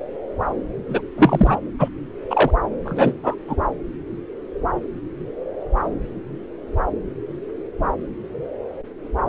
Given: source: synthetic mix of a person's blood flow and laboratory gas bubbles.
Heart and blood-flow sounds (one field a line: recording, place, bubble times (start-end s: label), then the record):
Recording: Doppler ultrasound of blood flow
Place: subclavian vein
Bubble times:
0.89-1.02 s: bubbles
1.17-1.57 s: bubbles
1.79-1.89 s: bubbles
2.30-2.50 s: bubbles
2.85-3.15 s: bubbles
3.23-3.35 s: bubbles
3.47-3.57 s: bubbles
From the record:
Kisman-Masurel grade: 223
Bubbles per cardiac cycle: several, 3 to 8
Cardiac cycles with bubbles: 10 to 50%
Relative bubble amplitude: loud (0.450 to 0.775)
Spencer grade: 2 (many but less than half of the cardiac periods contain bubble signals, singularly or in groups)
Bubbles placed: anywhere in the cardiac cycle